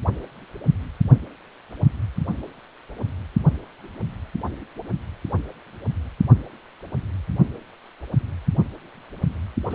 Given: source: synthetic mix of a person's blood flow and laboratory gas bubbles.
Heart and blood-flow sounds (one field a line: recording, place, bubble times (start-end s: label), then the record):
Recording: Doppler ultrasound of blood flow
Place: precordium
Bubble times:
9.71-9.75 s: bubbles
From the record:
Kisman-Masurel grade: 212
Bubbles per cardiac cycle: several, 3 to 8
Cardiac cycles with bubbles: 1 to 10%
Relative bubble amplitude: moderate (0.250 to 0.450)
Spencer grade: 1 (occasional bubble signal discernible with the cardiac motion signal, with majority of cardiac periods free of bubbles)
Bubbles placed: only in the low amplitude regions of the cardiac cycle